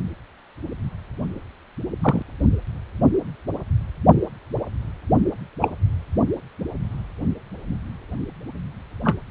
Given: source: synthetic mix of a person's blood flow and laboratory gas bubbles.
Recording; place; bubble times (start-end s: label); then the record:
Doppler ultrasound of blood flow; precordium
2.02-2.22 s: bubbles
5.61-5.69 s: bubbles
9.04-9.15 s: bubbles
From the record:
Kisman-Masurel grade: 123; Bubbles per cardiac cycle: 1 to 2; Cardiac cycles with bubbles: 10 to 50%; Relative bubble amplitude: loud (0.450 to 0.775); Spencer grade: 2 (many but less than half of the cardiac periods contain bubble signals, singularly or in groups); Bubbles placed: only in the low amplitude regions of the cardiac cycle